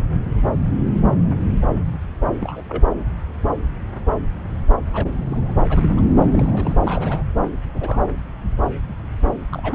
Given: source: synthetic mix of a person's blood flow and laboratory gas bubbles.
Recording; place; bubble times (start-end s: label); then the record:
Doppler ultrasound of blood flow; subclavian vein
2.40-2.62 s: bubbles
2.69-2.83 s: bubbles
4.91-5.53 s: bubbles
5.69-5.89 s: bubbles
5.97-6.05 s: bubbles
6.33-7.28 s: bubbles
7.72-7.99 s: bubbles
9.52-9.75 s: bubbles
From the record:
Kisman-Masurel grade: 221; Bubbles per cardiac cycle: several, 3 to 8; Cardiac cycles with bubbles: 10 to 50%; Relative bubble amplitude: barely perceptible (0.100 to 0.250); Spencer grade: 2 (many but less than half of the cardiac periods contain bubble signals, singularly or in groups); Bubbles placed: anywhere in the cardiac cycle